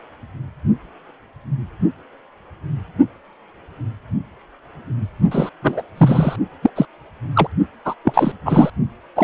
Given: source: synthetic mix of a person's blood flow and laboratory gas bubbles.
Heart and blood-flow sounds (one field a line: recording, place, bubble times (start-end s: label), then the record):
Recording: Doppler ultrasound of blood flow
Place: precordium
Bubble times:
5.31-5.50 s: bubbles
5.62-5.83 s: bubbles
5.97-6.36 s: bubbles
6.62-6.70 s: bubbles
6.75-6.86 s: bubbles
7.33-7.47 s: bubbles
7.85-7.94 s: bubbles
8.04-8.32 s: bubbles
8.45-8.70 s: bubbles
9.15-9.24 s: bubbles
From the record:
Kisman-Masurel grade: 223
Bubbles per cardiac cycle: several, 3 to 8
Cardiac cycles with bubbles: 10 to 50%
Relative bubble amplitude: loud (0.450 to 0.775)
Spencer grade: 2 (many but less than half of the cardiac periods contain bubble signals, singularly or in groups)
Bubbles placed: only in the low amplitude regions of the cardiac cycle